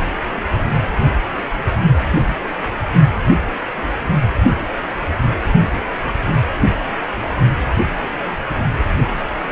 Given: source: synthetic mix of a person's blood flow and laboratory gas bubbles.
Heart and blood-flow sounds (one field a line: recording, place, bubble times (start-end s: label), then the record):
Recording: Doppler ultrasound of blood flow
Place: precordium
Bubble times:
no bubbles
From the record:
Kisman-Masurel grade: 000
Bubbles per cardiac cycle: 0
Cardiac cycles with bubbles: 0%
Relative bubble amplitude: no bubbles discernible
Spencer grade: 0 (complete lack of bubble signals)